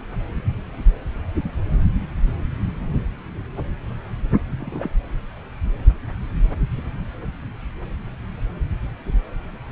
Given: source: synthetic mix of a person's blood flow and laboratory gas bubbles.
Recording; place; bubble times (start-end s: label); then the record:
Doppler ultrasound of blood flow; subclavian vein
4.60-4.90 s: bubbles
From the record:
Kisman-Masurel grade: 211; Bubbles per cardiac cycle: several, 3 to 8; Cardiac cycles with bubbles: 1 to 10%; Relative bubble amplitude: barely perceptible (0.100 to 0.250); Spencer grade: 1 (occasional bubble signal discernible with the cardiac motion signal, with majority of cardiac periods free of bubbles); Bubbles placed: anywhere in the cardiac cycle